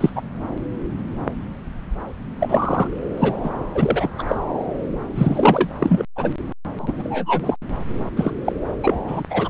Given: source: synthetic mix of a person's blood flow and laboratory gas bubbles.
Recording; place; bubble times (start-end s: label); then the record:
Doppler ultrasound of blood flow; subclavian vein
0.00-0.11 s: bubbles
0.15-0.21 s: bubbles
2.40-2.90 s: bubbles
3.19-3.35 s: bubbles
3.44-3.49 s: bubbles
3.74-4.09 s: bubbles
4.18-4.23 s: bubbles
4.27-4.35 s: bubbles
5.14-5.68 s: bubbles
5.80-6.04 s: bubbles
6.16-6.31 s: bubbles
6.75-7.56 s: bubbles
7.76-7.79 s: bubbles
8.16-8.32 s: bubbles
8.45-8.53 s: bubbles
8.83-8.98 s: bubbles
9.07-9.22 s: bubbles
9.29-9.50 s: bubbles
From the record:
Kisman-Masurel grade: 233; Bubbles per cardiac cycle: several, 3 to 8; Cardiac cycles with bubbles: 50 to 99%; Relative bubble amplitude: loud (0.450 to 0.775); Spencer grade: 3 (all of the cardiac periods contain showers or single bubble signals, but not dominating or overriding the cardiac motion signals); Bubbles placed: anywhere in the cardiac cycle